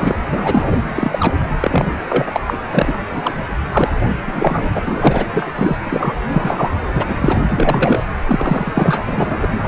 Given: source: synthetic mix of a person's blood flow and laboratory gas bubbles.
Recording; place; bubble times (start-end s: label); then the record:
Doppler ultrasound of blood flow; precordium
0.00-0.15 s: bubbles
0.31-0.79 s: bubbles
0.85-1.33 s: bubbles
1.60-1.91 s: bubbles
2.10-2.41 s: bubbles
2.47-2.58 s: bubbles
2.73-2.94 s: bubbles
3.11-3.35 s: bubbles
3.72-3.92 s: bubbles
4.27-4.67 s: bubbles
4.75-5.24 s: bubbles
5.31-5.52 s: bubbles
5.55-5.76 s: bubbles
5.84-6.15 s: bubbles
6.31-6.71 s: bubbles
6.87-7.39 s: bubbles
7.47-8.04 s: bubbles
8.26-9.03 s: bubbles
9.08-9.47 s: bubbles
9.60-9.68 s: bubbles
From the record:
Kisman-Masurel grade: 243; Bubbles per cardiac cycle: several, 3 to 8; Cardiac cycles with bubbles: 100%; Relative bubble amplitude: loud (0.450 to 0.775); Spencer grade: 3 (all of the cardiac periods contain showers or single bubble signals, but not dominating or overriding the cardiac motion signals); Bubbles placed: anywhere in the cardiac cycle